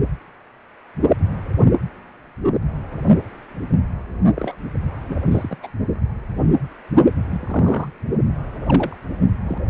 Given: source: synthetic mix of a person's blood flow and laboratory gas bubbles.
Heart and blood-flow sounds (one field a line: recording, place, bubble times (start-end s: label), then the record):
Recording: Doppler ultrasound of blood flow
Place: precordium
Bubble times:
4.35-4.55 s: bubbles
5.07-5.21 s: bubbles
5.31-5.56 s: bubbles
5.62-5.67 s: bubbles
7.31-7.92 s: bubbles
8.66-8.96 s: bubbles
9.44-9.58 s: bubbles
From the record:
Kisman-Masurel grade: 221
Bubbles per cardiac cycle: several, 3 to 8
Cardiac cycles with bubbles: 10 to 50%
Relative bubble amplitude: barely perceptible (0.100 to 0.250)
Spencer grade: 2 (many but less than half of the cardiac periods contain bubble signals, singularly or in groups)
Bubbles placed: only in the low amplitude regions of the cardiac cycle